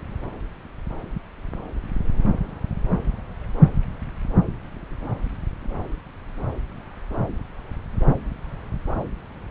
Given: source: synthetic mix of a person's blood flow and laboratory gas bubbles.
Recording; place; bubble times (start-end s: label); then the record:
Doppler ultrasound of blood flow; subclavian vein
no bubbles
From the record:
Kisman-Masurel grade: 000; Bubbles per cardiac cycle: 0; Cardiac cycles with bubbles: 0%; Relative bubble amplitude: no bubbles discernible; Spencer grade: 0 (complete lack of bubble signals)